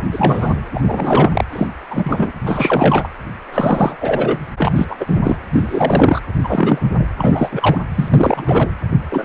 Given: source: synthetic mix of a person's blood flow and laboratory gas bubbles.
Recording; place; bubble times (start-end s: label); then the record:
Doppler ultrasound of blood flow; precordium
0.00-0.06 s: bubbles
0.12-0.60 s: bubbles
0.74-0.82 s: bubbles
0.85-1.43 s: bubbles
1.52-1.67 s: bubbles
1.90-2.32 s: bubbles
2.45-3.09 s: bubbles
3.52-3.97 s: bubbles
4.00-4.40 s: bubbles
4.58-4.96 s: bubbles
5.00-5.21 s: bubbles
5.23-5.37 s: bubbles
5.53-6.20 s: bubbles
6.44-6.87 s: bubbles
6.98-7.07 s: bubbles
7.20-7.83 s: bubbles
7.95-8.69 s: bubbles
9.10-9.25 s: bubbles
From the record:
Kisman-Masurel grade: 343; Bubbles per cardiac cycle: rolling drumbeat, 9 or more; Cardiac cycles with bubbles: 100%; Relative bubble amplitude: loud (0.450 to 0.775); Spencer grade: 3 (all of the cardiac periods contain showers or single bubble signals, but not dominating or overriding the cardiac motion signals); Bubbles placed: anywhere in the cardiac cycle